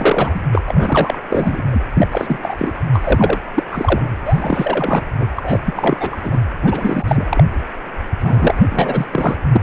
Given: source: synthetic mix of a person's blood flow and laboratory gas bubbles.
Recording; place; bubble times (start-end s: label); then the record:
Doppler ultrasound of blood flow; precordium
0.00-0.40 s: bubbles
0.53-0.61 s: bubbles
0.66-1.19 s: bubbles
1.29-1.62 s: bubbles
1.71-1.80 s: bubbles
1.94-2.08 s: bubbles
2.12-2.38 s: bubbles
2.42-2.74 s: bubbles
2.92-3.39 s: bubbles
3.55-3.65 s: bubbles
3.71-4.08 s: bubbles
4.26-5.03 s: bubbles
5.20-5.28 s: bubbles
5.37-5.60 s: bubbles
5.64-6.17 s: bubbles
6.23-6.38 s: bubbles
6.62-7.04 s: bubbles
7.08-7.43 s: bubbles
8.20-9.06 s: bubbles
9.11-9.37 s: bubbles
9.52-9.61 s: bubbles
From the record:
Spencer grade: 3 (all of the cardiac periods contain showers or single bubble signals, but not dominating or overriding the cardiac motion signals); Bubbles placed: anywhere in the cardiac cycle